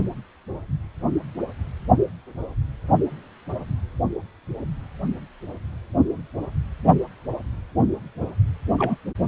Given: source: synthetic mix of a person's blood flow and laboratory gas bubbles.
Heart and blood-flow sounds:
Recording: Doppler ultrasound of blood flow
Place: precordium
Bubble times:
8.78-8.96 s: bubbles
From the record:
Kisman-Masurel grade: 112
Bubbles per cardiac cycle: 1 to 2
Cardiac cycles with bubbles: 1 to 10%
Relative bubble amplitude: moderate (0.250 to 0.450)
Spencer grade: 1 (occasional bubble signal discernible with the cardiac motion signal, with majority of cardiac periods free of bubbles)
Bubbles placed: only in the low amplitude regions of the cardiac cycle

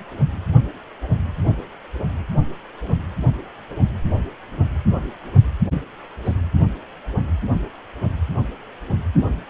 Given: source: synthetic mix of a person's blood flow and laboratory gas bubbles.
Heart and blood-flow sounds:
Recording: Doppler ultrasound of blood flow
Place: precordium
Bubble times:
5.71-5.82 s: bubbles
6.25-6.34 s: bubbles
From the record:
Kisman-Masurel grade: 111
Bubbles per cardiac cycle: 1 to 2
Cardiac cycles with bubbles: 1 to 10%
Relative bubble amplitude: barely perceptible (0.100 to 0.250)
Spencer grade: 1 (occasional bubble signal discernible with the cardiac motion signal, with majority of cardiac periods free of bubbles)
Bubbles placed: anywhere in the cardiac cycle

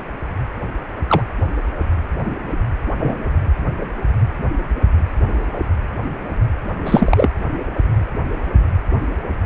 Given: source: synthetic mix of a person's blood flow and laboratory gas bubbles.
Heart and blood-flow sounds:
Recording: Doppler ultrasound of blood flow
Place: precordium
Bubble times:
1.07-1.21 s: bubbles
2.98-3.37 s: bubbles
6.85-7.28 s: bubbles
From the record:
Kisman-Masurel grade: 123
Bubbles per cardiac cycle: 1 to 2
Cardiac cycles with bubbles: 10 to 50%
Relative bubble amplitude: loud (0.450 to 0.775)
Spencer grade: 2 (many but less than half of the cardiac periods contain bubble signals, singularly or in groups)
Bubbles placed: anywhere in the cardiac cycle

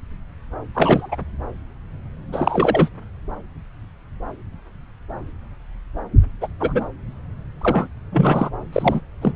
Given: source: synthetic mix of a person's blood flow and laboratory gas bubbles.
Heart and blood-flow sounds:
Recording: Doppler ultrasound of blood flow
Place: subclavian vein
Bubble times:
0.75-1.17 s: bubbles
2.32-2.90 s: bubbles
6.41-6.48 s: bubbles
6.60-6.84 s: bubbles
7.61-7.87 s: bubbles
8.11-8.49 s: bubbles
8.72-9.00 s: bubbles
9.21-9.32 s: bubbles
From the record:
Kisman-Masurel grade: 223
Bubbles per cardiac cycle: several, 3 to 8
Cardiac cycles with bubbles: 10 to 50%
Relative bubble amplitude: loud (0.450 to 0.775)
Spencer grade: 2 (many but less than half of the cardiac periods contain bubble signals, singularly or in groups)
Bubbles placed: anywhere in the cardiac cycle

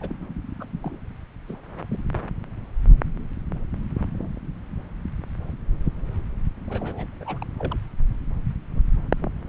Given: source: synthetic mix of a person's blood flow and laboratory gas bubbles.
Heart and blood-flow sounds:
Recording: Doppler ultrasound of blood flow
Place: subclavian vein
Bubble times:
0.01-0.14 s: bubbles
0.60-0.65 s: bubbles
0.83-0.99 s: bubbles
1.48-1.56 s: bubbles
1.71-1.74 s: bubbles
1.77-2.00 s: bubbles
6.68-7.08 s: bubbles
7.21-7.39 s: bubbles
7.42-7.46 s: bubbles
7.59-7.77 s: bubbles
From the record:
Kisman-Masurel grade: 221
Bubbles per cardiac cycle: several, 3 to 8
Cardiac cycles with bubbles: 10 to 50%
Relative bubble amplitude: barely perceptible (0.100 to 0.250)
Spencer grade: 2 (many but less than half of the cardiac periods contain bubble signals, singularly or in groups)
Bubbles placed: anywhere in the cardiac cycle

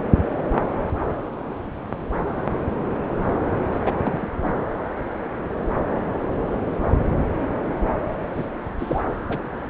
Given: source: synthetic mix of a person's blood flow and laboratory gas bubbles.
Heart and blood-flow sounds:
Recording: Doppler ultrasound of blood flow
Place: subclavian vein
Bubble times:
3.73-3.80 s: bubbles
3.86-4.29 s: bubbles
4.42-4.54 s: bubbles
8.33-8.45 s: bubbles
8.78-9.02 s: bubbles
9.29-9.38 s: bubbles
From the record:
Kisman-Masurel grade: 222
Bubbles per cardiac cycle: several, 3 to 8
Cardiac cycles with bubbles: 10 to 50%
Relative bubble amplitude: moderate (0.250 to 0.450)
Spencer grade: 2 (many but less than half of the cardiac periods contain bubble signals, singularly or in groups)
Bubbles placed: anywhere in the cardiac cycle

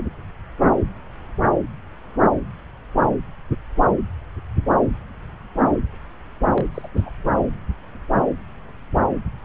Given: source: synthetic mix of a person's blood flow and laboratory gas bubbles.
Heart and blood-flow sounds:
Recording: Doppler ultrasound of blood flow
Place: subclavian vein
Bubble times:
6.54-6.67 s: bubbles
6.74-6.88 s: bubbles
6.96-7.10 s: bubbles
From the record:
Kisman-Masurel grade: 211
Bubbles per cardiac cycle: several, 3 to 8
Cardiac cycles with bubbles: 1 to 10%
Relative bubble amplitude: barely perceptible (0.100 to 0.250)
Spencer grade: 1 (occasional bubble signal discernible with the cardiac motion signal, with majority of cardiac periods free of bubbles)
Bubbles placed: anywhere in the cardiac cycle

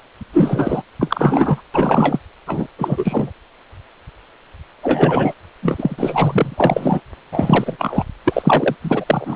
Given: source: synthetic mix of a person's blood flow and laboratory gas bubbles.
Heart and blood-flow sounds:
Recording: Doppler ultrasound of blood flow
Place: precordium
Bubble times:
0.33-0.82 s: bubbles
1.00-1.61 s: bubbles
1.74-2.19 s: bubbles
2.46-2.67 s: bubbles
2.78-3.31 s: bubbles
4.83-5.34 s: bubbles
5.62-7.01 s: bubbles
7.32-8.04 s: bubbles
8.24-8.75 s: bubbles
8.82-9.36 s: bubbles
From the record:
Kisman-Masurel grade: 333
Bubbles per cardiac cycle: rolling drumbeat, 9 or more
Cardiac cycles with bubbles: 50 to 99%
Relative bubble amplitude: loud (0.450 to 0.775)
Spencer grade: 3 (all of the cardiac periods contain showers or single bubble signals, but not dominating or overriding the cardiac motion signals)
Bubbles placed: anywhere in the cardiac cycle

